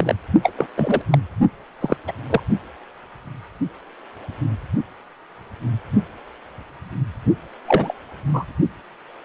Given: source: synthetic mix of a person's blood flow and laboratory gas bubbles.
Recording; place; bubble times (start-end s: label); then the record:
Doppler ultrasound of blood flow; precordium
0.00-0.14 s: bubbles
0.43-0.52 s: bubbles
0.57-0.67 s: bubbles
0.77-1.02 s: bubbles
1.10-1.19 s: bubbles
1.80-1.97 s: bubbles
2.07-2.12 s: bubbles
2.29-2.40 s: bubbles
7.66-7.94 s: bubbles
8.33-8.44 s: bubbles
From the record:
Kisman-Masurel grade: 232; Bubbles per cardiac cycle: several, 3 to 8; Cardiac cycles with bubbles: 50 to 99%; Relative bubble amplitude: moderate (0.250 to 0.450); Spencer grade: 3 (all of the cardiac periods contain showers or single bubble signals, but not dominating or overriding the cardiac motion signals); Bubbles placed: only in the low amplitude regions of the cardiac cycle